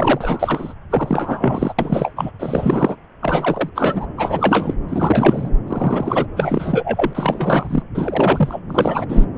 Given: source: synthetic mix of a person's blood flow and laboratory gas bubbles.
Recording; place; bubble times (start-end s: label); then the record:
Doppler ultrasound of blood flow; subclavian vein
0.00-0.73 s: bubbles
0.90-1.74 s: bubbles
1.78-2.12 s: bubbles
2.16-2.31 s: bubbles
2.39-2.96 s: bubbles
3.22-3.69 s: bubbles
3.75-4.06 s: bubbles
4.17-4.74 s: bubbles
4.89-5.50 s: bubbles
5.67-6.27 s: bubbles
6.36-7.83 s: bubbles
7.94-8.60 s: bubbles
8.69-9.05 s: bubbles
9.08-9.25 s: bubbles
From the record:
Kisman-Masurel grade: 343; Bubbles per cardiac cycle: rolling drumbeat, 9 or more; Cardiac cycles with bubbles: 100%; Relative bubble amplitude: loud (0.450 to 0.775); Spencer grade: 3 (all of the cardiac periods contain showers or single bubble signals, but not dominating or overriding the cardiac motion signals); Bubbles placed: anywhere in the cardiac cycle